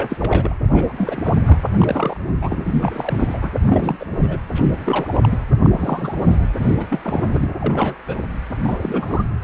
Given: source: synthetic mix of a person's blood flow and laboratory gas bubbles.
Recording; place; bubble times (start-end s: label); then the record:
Doppler ultrasound of blood flow; precordium
0.00-0.17 s: bubbles
0.20-0.54 s: bubbles
0.72-1.33 s: bubbles
1.46-1.58 s: bubbles
1.78-2.17 s: bubbles
2.42-2.58 s: bubbles
2.63-3.50 s: bubbles
3.62-4.06 s: bubbles
4.17-4.39 s: bubbles
4.54-5.07 s: bubbles
5.09-5.38 s: bubbles
5.63-6.49 s: bubbles
6.58-6.76 s: bubbles
6.79-7.49 s: bubbles
7.58-7.95 s: bubbles
8.07-8.17 s: bubbles
8.63-9.25 s: bubbles
9.42-9.44 s: bubbles
From the record:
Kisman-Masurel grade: 342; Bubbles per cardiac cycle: rolling drumbeat, 9 or more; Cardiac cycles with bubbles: 100%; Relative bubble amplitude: moderate (0.250 to 0.450); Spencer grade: 3 (all of the cardiac periods contain showers or single bubble signals, but not dominating or overriding the cardiac motion signals); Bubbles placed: anywhere in the cardiac cycle